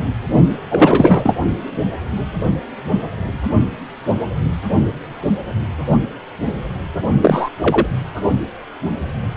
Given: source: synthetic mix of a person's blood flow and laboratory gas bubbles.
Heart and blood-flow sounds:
Doppler ultrasound of blood flow; precordium
0.70-1.36 s: bubbles
7.20-7.49 s: bubbles
7.61-7.87 s: bubbles
From the record:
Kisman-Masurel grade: 223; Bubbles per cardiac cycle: several, 3 to 8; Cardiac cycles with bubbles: 10 to 50%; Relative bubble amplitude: loud (0.450 to 0.775); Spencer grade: 2 (many but less than half of the cardiac periods contain bubble signals, singularly or in groups); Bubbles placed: only in the low amplitude regions of the cardiac cycle

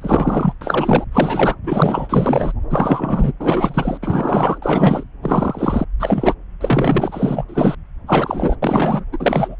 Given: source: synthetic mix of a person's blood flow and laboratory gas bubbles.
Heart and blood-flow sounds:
Doppler ultrasound of blood flow; subclavian vein
0.01-0.54 s: bubbles
0.61-1.04 s: bubbles
1.11-1.55 s: bubbles
1.63-2.53 s: bubbles
2.70-3.32 s: bubbles
3.40-3.98 s: bubbles
4.03-4.58 s: bubbles
4.62-5.04 s: bubbles
5.23-5.84 s: bubbles
6.00-6.33 s: bubbles
6.60-7.45 s: bubbles
7.49-7.75 s: bubbles
8.07-8.56 s: bubbles
8.62-9.04 s: bubbles
9.12-9.55 s: bubbles
From the record:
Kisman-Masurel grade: 343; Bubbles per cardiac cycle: rolling drumbeat, 9 or more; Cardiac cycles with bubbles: 100%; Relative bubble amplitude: loud (0.450 to 0.775); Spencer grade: 3 (all of the cardiac periods contain showers or single bubble signals, but not dominating or overriding the cardiac motion signals); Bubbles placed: anywhere in the cardiac cycle

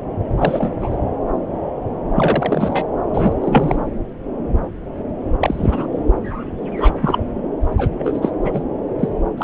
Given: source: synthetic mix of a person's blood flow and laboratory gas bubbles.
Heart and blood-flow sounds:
Doppler ultrasound of blood flow; subclavian vein
0.38-0.70 s: bubbles
0.81-0.96 s: bubbles
2.15-2.83 s: bubbles
3.11-3.33 s: bubbles
3.40-3.77 s: bubbles
5.40-5.87 s: bubbles
6.76-6.93 s: bubbles
7.01-7.23 s: bubbles
7.77-7.91 s: bubbles
7.98-8.31 s: bubbles
8.45-8.62 s: bubbles
8.99-9.09 s: bubbles
9.37-9.44 s: bubbles
From the record:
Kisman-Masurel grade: 233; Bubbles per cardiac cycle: several, 3 to 8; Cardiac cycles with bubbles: 50 to 99%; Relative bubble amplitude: loud (0.450 to 0.775); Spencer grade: 3 (all of the cardiac periods contain showers or single bubble signals, but not dominating or overriding the cardiac motion signals); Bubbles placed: anywhere in the cardiac cycle

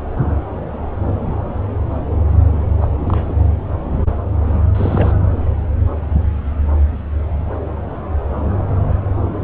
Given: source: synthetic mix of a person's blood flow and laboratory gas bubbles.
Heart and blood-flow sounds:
Doppler ultrasound of blood flow; subclavian vein
2.82-2.88 s: bubbles
3.03-3.35 s: bubbles
4.75-5.14 s: bubbles
From the record:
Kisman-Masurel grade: 222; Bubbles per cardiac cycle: several, 3 to 8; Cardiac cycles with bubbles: 10 to 50%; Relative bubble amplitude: moderate (0.250 to 0.450); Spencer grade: 2 (many but less than half of the cardiac periods contain bubble signals, singularly or in groups); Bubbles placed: anywhere in the cardiac cycle

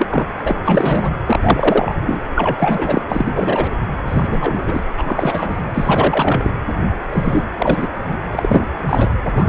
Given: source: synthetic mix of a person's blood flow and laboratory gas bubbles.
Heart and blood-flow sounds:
Doppler ultrasound of blood flow; precordium
0.00-0.27 s: bubbles
0.45-0.56 s: bubbles
0.65-1.15 s: bubbles
1.26-1.39 s: bubbles
1.43-1.95 s: bubbles
2.01-2.21 s: bubbles
2.35-3.01 s: bubbles
3.08-3.72 s: bubbles
4.05-4.89 s: bubbles
4.97-6.56 s: bubbles
7.12-7.44 s: bubbles
7.58-7.88 s: bubbles
8.04-8.16 s: bubbles
8.31-8.66 s: bubbles
8.86-9.10 s: bubbles
9.37-9.49 s: bubbles
From the record:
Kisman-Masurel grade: 343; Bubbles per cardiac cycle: rolling drumbeat, 9 or more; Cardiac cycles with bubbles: 100%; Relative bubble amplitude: loud (0.450 to 0.775); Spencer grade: 3 (all of the cardiac periods contain showers or single bubble signals, but not dominating or overriding the cardiac motion signals); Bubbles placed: anywhere in the cardiac cycle

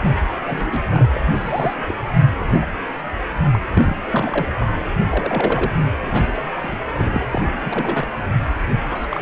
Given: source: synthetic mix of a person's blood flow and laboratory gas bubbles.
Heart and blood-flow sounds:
Doppler ultrasound of blood flow; precordium
0.03-0.41 s: bubbles
0.47-0.81 s: bubbles
0.89-1.06 s: bubbles
1.14-1.94 s: bubbles
2.39-2.65 s: bubbles
3.52-3.59 s: bubbles
3.74-3.96 s: bubbles
4.07-4.71 s: bubbles
5.00-5.05 s: bubbles
5.09-5.72 s: bubbles
6.02-6.78 s: bubbles
6.93-7.28 s: bubbles
7.31-8.07 s: bubbles
8.88-9.06 s: bubbles
9.09-9.22 s: bubbles
From the record:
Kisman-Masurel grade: 242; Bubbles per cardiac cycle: several, 3 to 8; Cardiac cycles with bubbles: 100%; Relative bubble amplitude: moderate (0.250 to 0.450); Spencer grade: 3 (all of the cardiac periods contain showers or single bubble signals, but not dominating or overriding the cardiac motion signals); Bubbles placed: anywhere in the cardiac cycle

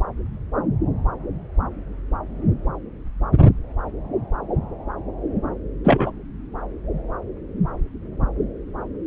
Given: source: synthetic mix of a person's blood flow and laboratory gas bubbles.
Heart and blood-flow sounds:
Doppler ultrasound of blood flow; subclavian vein
5.84-6.12 s: bubbles
From the record:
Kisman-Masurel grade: 113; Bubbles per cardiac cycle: 1 to 2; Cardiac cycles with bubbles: 1 to 10%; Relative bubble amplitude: loud (0.450 to 0.775); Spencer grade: 1 (occasional bubble signal discernible with the cardiac motion signal, with majority of cardiac periods free of bubbles); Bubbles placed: anywhere in the cardiac cycle

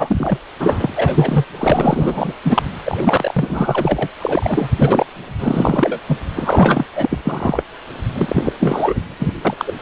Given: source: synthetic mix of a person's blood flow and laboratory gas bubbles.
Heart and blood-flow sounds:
Doppler ultrasound of blood flow; precordium
0.00-0.38 s: bubbles
0.59-1.45 s: bubbles
1.57-2.34 s: bubbles
2.44-2.62 s: bubbles
2.85-3.34 s: bubbles
3.36-4.10 s: bubbles
4.21-5.06 s: bubbles
5.39-5.99 s: bubbles
6.08-6.17 s: bubbles
6.35-6.85 s: bubbles
6.95-7.22 s: bubbles
7.25-7.64 s: bubbles
8.15-8.53 s: bubbles
8.59-9.02 s: bubbles
9.19-9.34 s: bubbles
9.45-9.54 s: bubbles
9.57-9.74 s: bubbles
From the record:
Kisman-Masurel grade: 343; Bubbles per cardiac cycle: rolling drumbeat, 9 or more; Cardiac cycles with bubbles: 100%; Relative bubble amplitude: loud (0.450 to 0.775); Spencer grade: 3 (all of the cardiac periods contain showers or single bubble signals, but not dominating or overriding the cardiac motion signals); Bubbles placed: anywhere in the cardiac cycle

